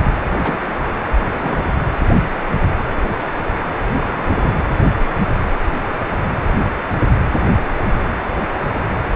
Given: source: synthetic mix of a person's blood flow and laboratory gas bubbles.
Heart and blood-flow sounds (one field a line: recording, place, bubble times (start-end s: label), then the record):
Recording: Doppler ultrasound of blood flow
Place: precordium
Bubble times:
0.29-0.58 s: bubbles
1.31-1.70 s: bubbles
3.95-4.53 s: bubbles
From the record:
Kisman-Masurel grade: 122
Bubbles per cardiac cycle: 1 to 2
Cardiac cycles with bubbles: 10 to 50%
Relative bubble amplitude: moderate (0.250 to 0.450)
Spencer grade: 2 (many but less than half of the cardiac periods contain bubble signals, singularly or in groups)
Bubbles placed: anywhere in the cardiac cycle